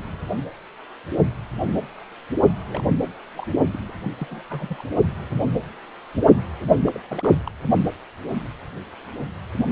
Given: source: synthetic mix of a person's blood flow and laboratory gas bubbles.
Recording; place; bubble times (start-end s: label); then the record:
Doppler ultrasound of blood flow; precordium
2.67-2.86 s: bubbles
3.35-3.47 s: bubbles
3.71-3.80 s: bubbles
3.89-3.92 s: bubbles
4.04-4.11 s: bubbles
4.19-4.43 s: bubbles
4.50-4.83 s: bubbles
6.60-6.66 s: bubbles
6.84-7.00 s: bubbles
7.09-7.30 s: bubbles
7.45-7.50 s: bubbles
From the record:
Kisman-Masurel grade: 221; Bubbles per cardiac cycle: several, 3 to 8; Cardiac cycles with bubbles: 10 to 50%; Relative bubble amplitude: barely perceptible (0.100 to 0.250); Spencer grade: 2 (many but less than half of the cardiac periods contain bubble signals, singularly or in groups); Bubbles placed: only in the low amplitude regions of the cardiac cycle